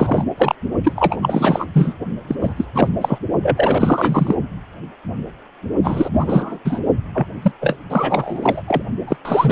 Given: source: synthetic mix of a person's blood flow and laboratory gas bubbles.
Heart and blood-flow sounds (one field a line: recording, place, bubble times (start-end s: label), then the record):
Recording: Doppler ultrasound of blood flow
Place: precordium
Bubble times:
0.00-0.24 s: bubbles
0.38-0.55 s: bubbles
0.83-1.18 s: bubbles
1.22-1.65 s: bubbles
1.74-1.95 s: bubbles
2.28-2.35 s: bubbles
2.41-2.54 s: bubbles
2.56-2.65 s: bubbles
2.75-2.88 s: bubbles
3.01-3.18 s: bubbles
3.42-4.35 s: bubbles
5.83-6.09 s: bubbles
6.13-6.58 s: bubbles
6.64-6.79 s: bubbles
7.14-7.27 s: bubbles
7.42-7.51 s: bubbles
7.61-7.76 s: bubbles
7.90-8.62 s: bubbles
8.68-8.83 s: bubbles
9.07-9.17 s: bubbles
9.25-9.52 s: bubbles
From the record:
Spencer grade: 3 (all of the cardiac periods contain showers or single bubble signals, but not dominating or overriding the cardiac motion signals)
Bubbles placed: only in the low amplitude regions of the cardiac cycle